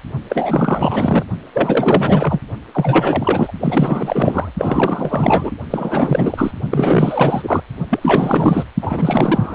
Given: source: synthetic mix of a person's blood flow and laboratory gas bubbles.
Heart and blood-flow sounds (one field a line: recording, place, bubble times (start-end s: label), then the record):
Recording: Doppler ultrasound of blood flow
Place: precordium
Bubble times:
0.30-1.24 s: bubbles
1.53-2.39 s: bubbles
2.74-3.52 s: bubbles
3.60-4.52 s: bubbles
4.58-5.50 s: bubbles
5.70-6.51 s: bubbles
6.70-7.62 s: bubbles
7.90-8.63 s: bubbles
8.82-9.55 s: bubbles
From the record:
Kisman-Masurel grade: 444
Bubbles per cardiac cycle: continuous sound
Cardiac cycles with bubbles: 100%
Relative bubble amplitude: maximal (0.775 to 0.999)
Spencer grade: 4 (maximum detectable bubble signal sounding continuously throughout systole and diastole of every cardiac period, and overriding the amplitude of the normal cardiac signals)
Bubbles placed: only in the low amplitude regions of the cardiac cycle